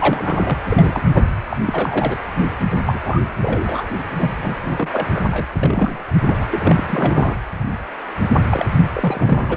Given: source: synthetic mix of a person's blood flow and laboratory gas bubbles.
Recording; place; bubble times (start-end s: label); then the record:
Doppler ultrasound of blood flow; precordium
0.00-0.58 s: bubbles
0.69-1.35 s: bubbles
1.50-1.57 s: bubbles
1.67-2.17 s: bubbles
2.87-3.00 s: bubbles
3.02-3.20 s: bubbles
3.42-3.87 s: bubbles
4.17-4.35 s: bubbles
4.42-5.23 s: bubbles
5.30-5.47 s: bubbles
5.63-6.04 s: bubbles
6.26-6.46 s: bubbles
6.51-7.36 s: bubbles
8.50-8.66 s: bubbles
8.94-9.57 s: bubbles
From the record:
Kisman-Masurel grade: 332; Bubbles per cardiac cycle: rolling drumbeat, 9 or more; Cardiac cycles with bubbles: 50 to 99%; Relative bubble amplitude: moderate (0.250 to 0.450); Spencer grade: 3 (all of the cardiac periods contain showers or single bubble signals, but not dominating or overriding the cardiac motion signals); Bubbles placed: anywhere in the cardiac cycle